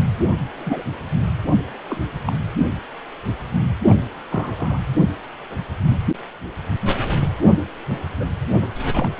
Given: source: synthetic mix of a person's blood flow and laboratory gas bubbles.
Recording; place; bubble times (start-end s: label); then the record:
Doppler ultrasound of blood flow; precordium
0.58-0.82 s: bubbles
1.89-2.03 s: bubbles
2.27-2.33 s: bubbles
3.89-3.94 s: bubbles
4.31-4.79 s: bubbles
8.19-8.25 s: bubbles
8.58-8.67 s: bubbles
8.92-9.10 s: bubbles
From the record:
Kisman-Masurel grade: 122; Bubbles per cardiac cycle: 1 to 2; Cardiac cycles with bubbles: 10 to 50%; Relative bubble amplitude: moderate (0.250 to 0.450); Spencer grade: 2 (many but less than half of the cardiac periods contain bubble signals, singularly or in groups); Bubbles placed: anywhere in the cardiac cycle